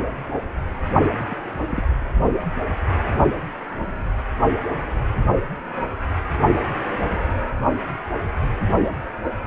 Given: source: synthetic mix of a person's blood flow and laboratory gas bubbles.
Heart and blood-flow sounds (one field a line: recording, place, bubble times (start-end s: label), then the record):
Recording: Doppler ultrasound of blood flow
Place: precordium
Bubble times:
1.18-1.24 s: bubbles
1.28-1.36 s: bubbles
1.70-1.83 s: bubbles
From the record:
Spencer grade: 1 (occasional bubble signal discernible with the cardiac motion signal, with majority of cardiac periods free of bubbles)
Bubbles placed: anywhere in the cardiac cycle